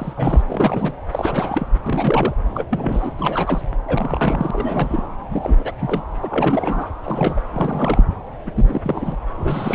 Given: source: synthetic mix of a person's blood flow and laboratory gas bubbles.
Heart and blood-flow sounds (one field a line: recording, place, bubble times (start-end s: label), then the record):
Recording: Doppler ultrasound of blood flow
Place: subclavian vein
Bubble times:
0.00-0.13 s: bubbles
0.16-0.43 s: bubbles
0.47-0.93 s: bubbles
1.11-1.68 s: bubbles
1.86-2.34 s: bubbles
2.55-2.64 s: bubbles
2.70-3.12 s: bubbles
3.18-3.62 s: bubbles
3.88-5.03 s: bubbles
5.31-5.72 s: bubbles
5.81-6.03 s: bubbles
6.21-6.88 s: bubbles
7.05-7.42 s: bubbles
7.53-8.04 s: bubbles
8.45-8.51 s: bubbles
8.55-8.81 s: bubbles
8.84-9.17 s: bubbles
9.38-9.75 s: bubbles
From the record:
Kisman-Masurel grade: 342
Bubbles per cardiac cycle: rolling drumbeat, 9 or more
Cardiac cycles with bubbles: 100%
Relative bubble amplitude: moderate (0.250 to 0.450)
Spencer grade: 3 (all of the cardiac periods contain showers or single bubble signals, but not dominating or overriding the cardiac motion signals)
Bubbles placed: anywhere in the cardiac cycle